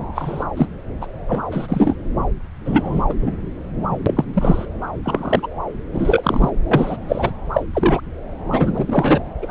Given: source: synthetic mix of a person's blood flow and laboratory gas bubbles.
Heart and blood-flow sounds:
Doppler ultrasound of blood flow; subclavian vein
0.15-0.44 s: bubbles
0.56-0.68 s: bubbles
1.00-1.06 s: bubbles
1.28-1.42 s: bubbles
1.51-1.95 s: bubbles
2.65-3.04 s: bubbles
3.08-3.15 s: bubbles
3.21-3.38 s: bubbles
3.91-3.98 s: bubbles
4.06-4.24 s: bubbles
4.33-4.65 s: bubbles
5.04-5.47 s: bubbles
5.92-6.50 s: bubbles
6.71-6.97 s: bubbles
7.08-7.32 s: bubbles
7.53-7.63 s: bubbles
7.73-8.00 s: bubbles
8.49-9.19 s: bubbles
9.42-9.51 s: bubbles
From the record:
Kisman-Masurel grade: 243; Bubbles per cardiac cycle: several, 3 to 8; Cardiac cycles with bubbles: 100%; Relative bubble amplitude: loud (0.450 to 0.775); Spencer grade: 3 (all of the cardiac periods contain showers or single bubble signals, but not dominating or overriding the cardiac motion signals); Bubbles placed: anywhere in the cardiac cycle

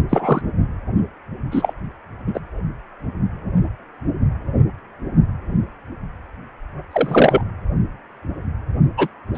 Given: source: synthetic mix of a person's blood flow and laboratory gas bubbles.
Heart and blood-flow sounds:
Doppler ultrasound of blood flow; precordium
0.09-0.41 s: bubbles
1.51-1.74 s: bubbles
2.27-2.40 s: bubbles
6.90-7.42 s: bubbles
8.97-9.08 s: bubbles
9.34-9.38 s: bubbles
From the record:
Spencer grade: 2 (many but less than half of the cardiac periods contain bubble signals, singularly or in groups); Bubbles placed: only in the low amplitude regions of the cardiac cycle

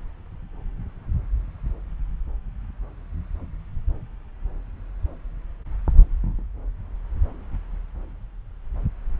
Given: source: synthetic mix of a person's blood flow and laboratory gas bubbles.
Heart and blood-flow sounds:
Doppler ultrasound of blood flow; subclavian vein
no bubbles
From the record:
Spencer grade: 0 (complete lack of bubble signals)

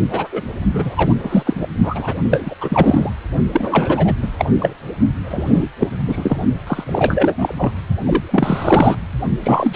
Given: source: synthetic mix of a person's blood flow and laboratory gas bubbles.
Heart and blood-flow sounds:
Doppler ultrasound of blood flow; precordium
0.10-0.27 s: bubbles
0.32-0.42 s: bubbles
0.73-1.14 s: bubbles
1.19-1.68 s: bubbles
1.83-2.14 s: bubbles
2.24-2.55 s: bubbles
2.60-3.10 s: bubbles
3.53-4.14 s: bubbles
4.21-4.29 s: bubbles
4.38-4.50 s: bubbles
4.59-4.73 s: bubbles
5.23-5.69 s: bubbles
5.79-5.88 s: bubbles
6.04-6.41 s: bubbles
6.67-7.54 s: bubbles
7.58-7.73 s: bubbles
8.04-8.95 s: bubbles
9.42-9.73 s: bubbles
From the record:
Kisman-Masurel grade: 343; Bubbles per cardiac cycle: rolling drumbeat, 9 or more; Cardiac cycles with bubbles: 100%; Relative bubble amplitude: loud (0.450 to 0.775); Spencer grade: 3 (all of the cardiac periods contain showers or single bubble signals, but not dominating or overriding the cardiac motion signals); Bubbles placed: only in the low amplitude regions of the cardiac cycle

